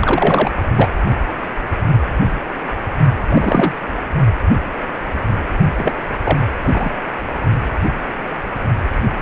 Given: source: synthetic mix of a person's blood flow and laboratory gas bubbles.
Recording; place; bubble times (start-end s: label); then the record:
Doppler ultrasound of blood flow; precordium
0.01-0.51 s: bubbles
0.77-0.91 s: bubbles
3.29-3.74 s: bubbles
5.77-5.94 s: bubbles
6.24-6.41 s: bubbles
6.64-6.92 s: bubbles
From the record:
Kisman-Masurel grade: 233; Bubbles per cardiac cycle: several, 3 to 8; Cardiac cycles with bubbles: 50 to 99%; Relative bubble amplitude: loud (0.450 to 0.775); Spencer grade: 3 (all of the cardiac periods contain showers or single bubble signals, but not dominating or overriding the cardiac motion signals); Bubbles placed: only in the low amplitude regions of the cardiac cycle